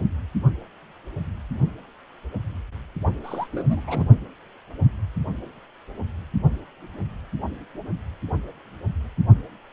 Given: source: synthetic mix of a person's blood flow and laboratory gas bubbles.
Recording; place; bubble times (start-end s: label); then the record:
Doppler ultrasound of blood flow; precordium
3.23-3.48 s: bubbles
3.52-4.07 s: bubbles
From the record:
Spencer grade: 1 (occasional bubble signal discernible with the cardiac motion signal, with majority of cardiac periods free of bubbles); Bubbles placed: only in the low amplitude regions of the cardiac cycle